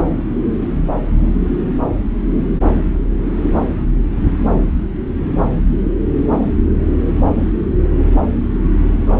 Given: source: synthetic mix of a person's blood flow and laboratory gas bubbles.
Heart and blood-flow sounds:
Doppler ultrasound of blood flow; subclavian vein
9.06-9.14 s: bubbles
From the record:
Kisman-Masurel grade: 211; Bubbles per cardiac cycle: several, 3 to 8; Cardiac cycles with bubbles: 1 to 10%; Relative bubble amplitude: barely perceptible (0.100 to 0.250); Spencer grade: 1 (occasional bubble signal discernible with the cardiac motion signal, with majority of cardiac periods free of bubbles); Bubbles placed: anywhere in the cardiac cycle

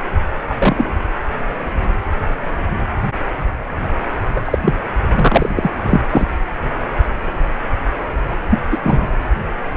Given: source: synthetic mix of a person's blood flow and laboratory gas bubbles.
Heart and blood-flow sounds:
Doppler ultrasound of blood flow; precordium
0.49-0.97 s: bubbles
4.35-4.41 s: bubbles
4.45-4.58 s: bubbles
4.64-4.74 s: bubbles
5.15-5.71 s: bubbles
5.83-6.00 s: bubbles
6.10-6.28 s: bubbles
8.50-8.60 s: bubbles
8.71-8.79 s: bubbles
8.83-9.08 s: bubbles
From the record:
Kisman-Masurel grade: 223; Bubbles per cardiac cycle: several, 3 to 8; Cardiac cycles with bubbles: 10 to 50%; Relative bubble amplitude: loud (0.450 to 0.775); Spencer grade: 2 (many but less than half of the cardiac periods contain bubble signals, singularly or in groups); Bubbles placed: anywhere in the cardiac cycle

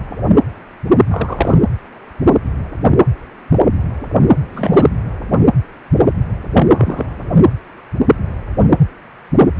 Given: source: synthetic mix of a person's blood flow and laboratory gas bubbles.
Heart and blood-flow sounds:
Doppler ultrasound of blood flow; precordium
1.10-1.58 s: bubbles
4.53-4.89 s: bubbles
6.53-7.05 s: bubbles
From the record:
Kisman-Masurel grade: 223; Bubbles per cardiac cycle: several, 3 to 8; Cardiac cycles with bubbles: 10 to 50%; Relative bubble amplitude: loud (0.450 to 0.775); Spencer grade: 2 (many but less than half of the cardiac periods contain bubble signals, singularly or in groups); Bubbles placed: anywhere in the cardiac cycle

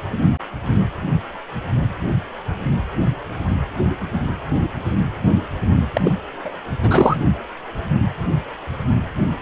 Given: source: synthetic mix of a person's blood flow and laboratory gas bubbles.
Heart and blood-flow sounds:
Doppler ultrasound of blood flow; precordium
5.93-6.12 s: bubbles
6.43-6.52 s: bubbles
6.81-7.17 s: bubbles
From the record:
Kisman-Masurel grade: 213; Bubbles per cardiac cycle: several, 3 to 8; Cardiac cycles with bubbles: 1 to 10%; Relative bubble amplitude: loud (0.450 to 0.775); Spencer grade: 1 (occasional bubble signal discernible with the cardiac motion signal, with majority of cardiac periods free of bubbles); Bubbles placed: anywhere in the cardiac cycle

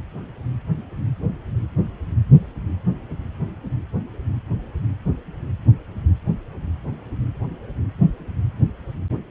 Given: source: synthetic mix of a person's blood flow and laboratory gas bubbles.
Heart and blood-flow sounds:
Doppler ultrasound of blood flow; precordium
no bubbles
From the record:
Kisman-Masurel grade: 000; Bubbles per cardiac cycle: 0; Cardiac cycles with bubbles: 0%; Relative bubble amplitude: no bubbles discernible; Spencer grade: 0 (complete lack of bubble signals)

